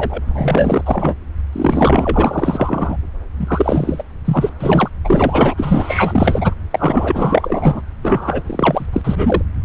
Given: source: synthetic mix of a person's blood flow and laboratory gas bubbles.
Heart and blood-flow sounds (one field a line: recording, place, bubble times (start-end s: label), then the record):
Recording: Doppler ultrasound of blood flow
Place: subclavian vein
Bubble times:
0.00-0.21 s: bubbles
0.25-1.15 s: bubbles
1.52-2.97 s: bubbles
3.39-4.03 s: bubbles
4.25-4.50 s: bubbles
4.59-4.90 s: bubbles
5.04-5.54 s: bubbles
5.57-6.54 s: bubbles
6.71-7.81 s: bubbles
8.03-8.42 s: bubbles
8.46-8.86 s: bubbles
8.93-9.02 s: bubbles
9.04-9.42 s: bubbles
From the record:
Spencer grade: 4 (maximum detectable bubble signal sounding continuously throughout systole and diastole of every cardiac period, and overriding the amplitude of the normal cardiac signals)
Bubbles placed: anywhere in the cardiac cycle